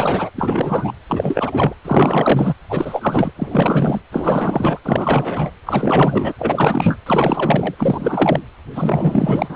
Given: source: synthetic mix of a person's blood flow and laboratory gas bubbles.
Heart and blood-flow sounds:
Doppler ultrasound of blood flow; precordium
0.00-0.30 s: bubbles
0.36-0.92 s: bubbles
1.08-1.74 s: bubbles
1.85-2.54 s: bubbles
2.69-3.32 s: bubbles
3.35-4.00 s: bubbles
4.11-4.79 s: bubbles
4.83-5.51 s: bubbles
5.66-6.33 s: bubbles
6.38-6.96 s: bubbles
7.06-7.75 s: bubbles
7.78-8.40 s: bubbles
8.74-9.56 s: bubbles
From the record:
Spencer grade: 4 (maximum detectable bubble signal sounding continuously throughout systole and diastole of every cardiac period, and overriding the amplitude of the normal cardiac signals); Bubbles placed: anywhere in the cardiac cycle

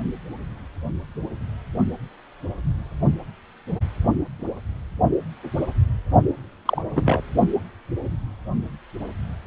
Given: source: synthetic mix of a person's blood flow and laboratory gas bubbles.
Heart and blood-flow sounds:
Doppler ultrasound of blood flow; precordium
6.65-6.82 s: bubbles
6.94-7.21 s: bubbles
From the record:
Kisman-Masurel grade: 222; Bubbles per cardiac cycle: several, 3 to 8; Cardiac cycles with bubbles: 10 to 50%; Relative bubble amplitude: moderate (0.250 to 0.450); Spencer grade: 2 (many but less than half of the cardiac periods contain bubble signals, singularly or in groups); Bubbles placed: only in the low amplitude regions of the cardiac cycle

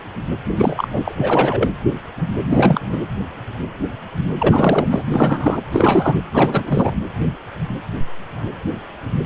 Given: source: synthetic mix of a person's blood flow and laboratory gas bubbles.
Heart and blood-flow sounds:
Doppler ultrasound of blood flow; precordium
0.55-1.01 s: bubbles
1.04-1.70 s: bubbles
2.50-2.81 s: bubbles
2.87-3.06 s: bubbles
4.40-5.02 s: bubbles
5.11-5.62 s: bubbles
5.71-6.21 s: bubbles
6.33-6.94 s: bubbles
From the record:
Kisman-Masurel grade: 333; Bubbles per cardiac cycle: rolling drumbeat, 9 or more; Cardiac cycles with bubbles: 50 to 99%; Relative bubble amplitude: loud (0.450 to 0.775); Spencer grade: 3 (all of the cardiac periods contain showers or single bubble signals, but not dominating or overriding the cardiac motion signals); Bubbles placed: anywhere in the cardiac cycle

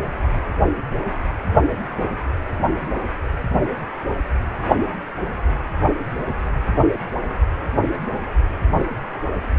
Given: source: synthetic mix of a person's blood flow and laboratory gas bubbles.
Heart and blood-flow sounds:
Doppler ultrasound of blood flow; precordium
no bubbles
From the record:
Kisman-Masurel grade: 000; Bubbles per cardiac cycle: 0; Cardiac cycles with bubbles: 0%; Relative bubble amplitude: no bubbles discernible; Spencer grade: 0 (complete lack of bubble signals)

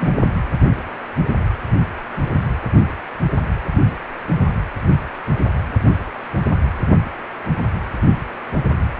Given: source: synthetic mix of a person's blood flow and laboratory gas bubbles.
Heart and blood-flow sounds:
Doppler ultrasound of blood flow; precordium
0.00-0.10 s: bubbles
From the record:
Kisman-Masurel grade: 112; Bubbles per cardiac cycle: 1 to 2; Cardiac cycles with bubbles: 1 to 10%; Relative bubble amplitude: moderate (0.250 to 0.450); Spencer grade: 1 (occasional bubble signal discernible with the cardiac motion signal, with majority of cardiac periods free of bubbles); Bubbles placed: anywhere in the cardiac cycle

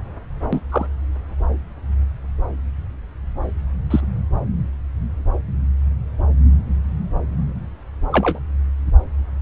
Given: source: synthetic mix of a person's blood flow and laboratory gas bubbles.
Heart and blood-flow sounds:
Doppler ultrasound of blood flow; subclavian vein
0.53-0.60 s: bubbles
0.71-0.86 s: bubbles
3.90-4.00 s: bubbles
8.12-8.39 s: bubbles
From the record:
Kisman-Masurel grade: 123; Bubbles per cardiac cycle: 1 to 2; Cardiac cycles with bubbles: 10 to 50%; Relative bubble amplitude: loud (0.450 to 0.775); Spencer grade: 2 (many but less than half of the cardiac periods contain bubble signals, singularly or in groups); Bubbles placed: anywhere in the cardiac cycle

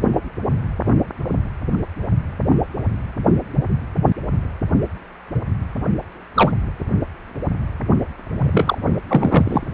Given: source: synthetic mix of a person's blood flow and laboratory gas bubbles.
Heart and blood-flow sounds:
Doppler ultrasound of blood flow; precordium
6.34-6.51 s: bubbles
8.38-8.78 s: bubbles
9.08-9.66 s: bubbles
From the record:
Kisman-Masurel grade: 123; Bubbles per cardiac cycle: 1 to 2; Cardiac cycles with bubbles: 10 to 50%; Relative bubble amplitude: loud (0.450 to 0.775); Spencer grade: 2 (many but less than half of the cardiac periods contain bubble signals, singularly or in groups); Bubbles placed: only in the low amplitude regions of the cardiac cycle

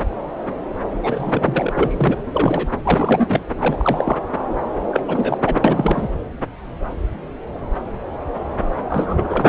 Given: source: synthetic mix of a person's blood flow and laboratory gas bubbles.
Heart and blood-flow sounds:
Doppler ultrasound of blood flow; subclavian vein
1.03-2.16 s: bubbles
2.33-2.67 s: bubbles
2.83-3.43 s: bubbles
3.59-4.20 s: bubbles
4.49-4.55 s: bubbles
4.92-5.03 s: bubbles
5.08-5.38 s: bubbles
5.45-5.54 s: bubbles
5.64-6.08 s: bubbles
8.89-9.49 s: bubbles
From the record:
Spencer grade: 3 (all of the cardiac periods contain showers or single bubble signals, but not dominating or overriding the cardiac motion signals); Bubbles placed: anywhere in the cardiac cycle

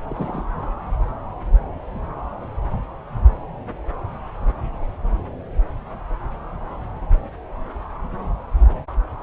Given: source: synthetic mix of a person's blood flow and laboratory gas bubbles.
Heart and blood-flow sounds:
Doppler ultrasound of blood flow; subclavian vein
0.09-0.46 s: bubbles
From the record:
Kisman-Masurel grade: 221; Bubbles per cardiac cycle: several, 3 to 8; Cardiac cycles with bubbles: 10 to 50%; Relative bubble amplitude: barely perceptible (0.100 to 0.250); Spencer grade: 2 (many but less than half of the cardiac periods contain bubble signals, singularly or in groups); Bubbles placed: anywhere in the cardiac cycle

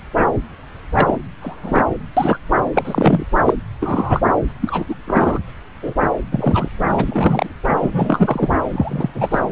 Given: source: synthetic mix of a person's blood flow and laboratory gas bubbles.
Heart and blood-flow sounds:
Doppler ultrasound of blood flow; subclavian vein
0.21-0.26 s: bubbles
0.93-1.19 s: bubbles
1.41-1.83 s: bubbles
2.17-2.39 s: bubbles
2.74-3.25 s: bubbles
3.46-3.54 s: bubbles
3.79-4.20 s: bubbles
4.61-4.86 s: bubbles
4.88-4.95 s: bubbles
5.07-5.39 s: bubbles
5.83-5.93 s: bubbles
6.32-6.70 s: bubbles
6.88-7.49 s: bubbles
7.64-7.69 s: bubbles
7.76-8.48 s: bubbles
8.72-9.10 s: bubbles
9.17-9.39 s: bubbles
From the record:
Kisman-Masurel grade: 243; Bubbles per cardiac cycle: several, 3 to 8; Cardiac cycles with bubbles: 100%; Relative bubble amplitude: loud (0.450 to 0.775); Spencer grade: 3 (all of the cardiac periods contain showers or single bubble signals, but not dominating or overriding the cardiac motion signals); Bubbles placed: anywhere in the cardiac cycle

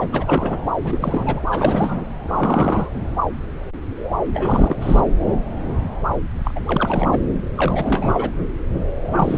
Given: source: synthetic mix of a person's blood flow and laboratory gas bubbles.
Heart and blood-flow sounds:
Doppler ultrasound of blood flow; subclavian vein
0.00-0.61 s: bubbles
0.79-1.40 s: bubbles
1.51-2.06 s: bubbles
2.27-2.90 s: bubbles
4.33-5.02 s: bubbles
6.44-6.60 s: bubbles
6.65-7.08 s: bubbles
7.11-7.19 s: bubbles
7.56-8.30 s: bubbles
9.06-9.38 s: bubbles
From the record:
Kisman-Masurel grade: 332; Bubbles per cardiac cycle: rolling drumbeat, 9 or more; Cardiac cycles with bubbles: 50 to 99%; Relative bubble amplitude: moderate (0.250 to 0.450); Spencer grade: 3 (all of the cardiac periods contain showers or single bubble signals, but not dominating or overriding the cardiac motion signals); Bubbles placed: anywhere in the cardiac cycle

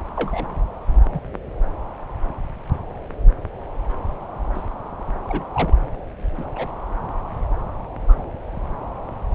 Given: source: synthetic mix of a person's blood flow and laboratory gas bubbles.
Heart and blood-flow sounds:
Doppler ultrasound of blood flow; subclavian vein
0.16-0.45 s: bubbles
1.13-1.19 s: bubbles
4.54-4.62 s: bubbles
5.24-5.45 s: bubbles
5.53-5.76 s: bubbles
6.37-6.45 s: bubbles
6.55-6.72 s: bubbles
8.04-8.24 s: bubbles
From the record:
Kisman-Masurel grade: 121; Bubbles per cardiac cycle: 1 to 2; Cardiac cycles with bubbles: 10 to 50%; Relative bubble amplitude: barely perceptible (0.100 to 0.250); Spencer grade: 2 (many but less than half of the cardiac periods contain bubble signals, singularly or in groups); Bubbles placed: anywhere in the cardiac cycle

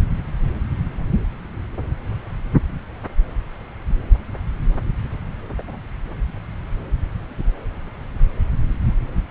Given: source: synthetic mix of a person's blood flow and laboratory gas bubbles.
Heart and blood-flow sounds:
Doppler ultrasound of blood flow; subclavian vein
5.57-5.63 s: bubbles
5.67-5.79 s: bubbles
From the record:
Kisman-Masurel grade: 111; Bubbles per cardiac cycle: 1 to 2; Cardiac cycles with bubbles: 1 to 10%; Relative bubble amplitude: barely perceptible (0.100 to 0.250); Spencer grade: 1 (occasional bubble signal discernible with the cardiac motion signal, with majority of cardiac periods free of bubbles); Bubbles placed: anywhere in the cardiac cycle

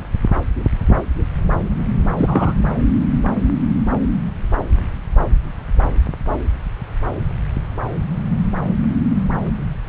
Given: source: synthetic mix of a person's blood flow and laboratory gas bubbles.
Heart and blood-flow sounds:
Doppler ultrasound of blood flow; subclavian vein
2.17-2.54 s: bubbles
From the record:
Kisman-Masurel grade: 213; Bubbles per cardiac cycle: several, 3 to 8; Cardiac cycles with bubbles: 1 to 10%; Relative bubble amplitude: loud (0.450 to 0.775); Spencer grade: 1 (occasional bubble signal discernible with the cardiac motion signal, with majority of cardiac periods free of bubbles); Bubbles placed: anywhere in the cardiac cycle

